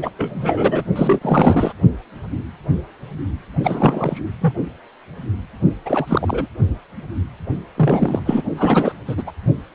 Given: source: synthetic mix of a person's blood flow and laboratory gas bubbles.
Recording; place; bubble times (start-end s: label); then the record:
Doppler ultrasound of blood flow; precordium
0.02-0.10 s: bubbles
0.18-0.84 s: bubbles
0.95-1.73 s: bubbles
3.63-4.21 s: bubbles
4.41-4.55 s: bubbles
5.86-6.47 s: bubbles
7.75-8.23 s: bubbles
8.26-8.43 s: bubbles
8.56-8.93 s: bubbles
9.07-9.24 s: bubbles
9.27-9.32 s: bubbles
From the record:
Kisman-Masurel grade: 333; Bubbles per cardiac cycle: rolling drumbeat, 9 or more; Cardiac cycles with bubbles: 50 to 99%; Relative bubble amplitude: loud (0.450 to 0.775); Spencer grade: 3 (all of the cardiac periods contain showers or single bubble signals, but not dominating or overriding the cardiac motion signals); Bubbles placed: only in the low amplitude regions of the cardiac cycle